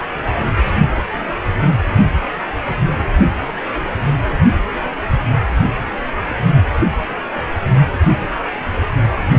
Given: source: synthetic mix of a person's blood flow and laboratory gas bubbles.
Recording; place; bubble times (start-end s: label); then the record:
Doppler ultrasound of blood flow; precordium
1.12-1.21 s: bubbles
5.30-5.34 s: bubbles
From the record:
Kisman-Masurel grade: 121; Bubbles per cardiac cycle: 1 to 2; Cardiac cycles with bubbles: 10 to 50%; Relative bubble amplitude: barely perceptible (0.100 to 0.250); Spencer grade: 2 (many but less than half of the cardiac periods contain bubble signals, singularly or in groups); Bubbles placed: anywhere in the cardiac cycle